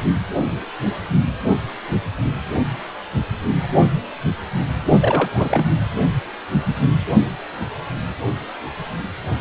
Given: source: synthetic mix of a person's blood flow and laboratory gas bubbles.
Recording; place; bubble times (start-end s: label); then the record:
Doppler ultrasound of blood flow; precordium
5.00-5.65 s: bubbles
From the record:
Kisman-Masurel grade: 222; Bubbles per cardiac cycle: several, 3 to 8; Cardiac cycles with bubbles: 10 to 50%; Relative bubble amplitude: moderate (0.250 to 0.450); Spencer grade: 2 (many but less than half of the cardiac periods contain bubble signals, singularly or in groups); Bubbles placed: only in the low amplitude regions of the cardiac cycle